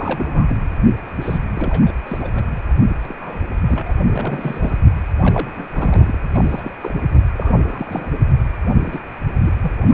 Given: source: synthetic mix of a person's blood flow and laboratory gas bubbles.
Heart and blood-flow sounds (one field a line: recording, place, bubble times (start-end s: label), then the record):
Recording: Doppler ultrasound of blood flow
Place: precordium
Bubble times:
0.00-0.44 s: bubbles
0.48-0.62 s: bubbles
1.17-1.38 s: bubbles
1.53-1.94 s: bubbles
2.06-2.18 s: bubbles
2.21-2.48 s: bubbles
3.05-3.15 s: bubbles
3.21-3.40 s: bubbles
3.68-3.92 s: bubbles
4.06-4.79 s: bubbles
5.22-5.51 s: bubbles
5.56-6.19 s: bubbles
6.32-6.75 s: bubbles
6.81-6.94 s: bubbles
7.12-7.20 s: bubbles
7.34-8.10 s: bubbles
8.79-8.99 s: bubbles
9.45-9.51 s: bubbles
9.60-9.75 s: bubbles
9.88-9.94 s: bubbles
From the record:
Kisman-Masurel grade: 242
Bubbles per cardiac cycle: several, 3 to 8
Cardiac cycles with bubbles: 100%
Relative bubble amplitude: moderate (0.250 to 0.450)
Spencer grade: 3 (all of the cardiac periods contain showers or single bubble signals, but not dominating or overriding the cardiac motion signals)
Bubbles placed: anywhere in the cardiac cycle